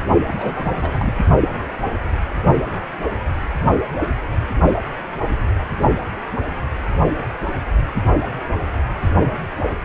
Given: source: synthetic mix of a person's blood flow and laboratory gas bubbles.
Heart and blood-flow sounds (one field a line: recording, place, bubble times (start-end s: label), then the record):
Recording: Doppler ultrasound of blood flow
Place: precordium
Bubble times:
0.27-1.19 s: bubbles
From the record:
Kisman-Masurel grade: 211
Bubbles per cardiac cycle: several, 3 to 8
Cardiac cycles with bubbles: 1 to 10%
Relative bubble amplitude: barely perceptible (0.100 to 0.250)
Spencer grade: 1 (occasional bubble signal discernible with the cardiac motion signal, with majority of cardiac periods free of bubbles)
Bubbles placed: only in the low amplitude regions of the cardiac cycle